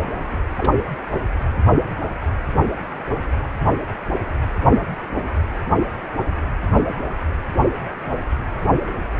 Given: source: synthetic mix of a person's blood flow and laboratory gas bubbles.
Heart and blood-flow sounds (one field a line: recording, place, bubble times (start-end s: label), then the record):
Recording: Doppler ultrasound of blood flow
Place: precordium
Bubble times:
0.32-0.37 s: bubbles
0.57-0.72 s: bubbles
From the record:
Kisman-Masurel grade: 111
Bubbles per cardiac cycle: 1 to 2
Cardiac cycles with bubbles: 1 to 10%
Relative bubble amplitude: barely perceptible (0.100 to 0.250)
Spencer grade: 1 (occasional bubble signal discernible with the cardiac motion signal, with majority of cardiac periods free of bubbles)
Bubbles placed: only in the low amplitude regions of the cardiac cycle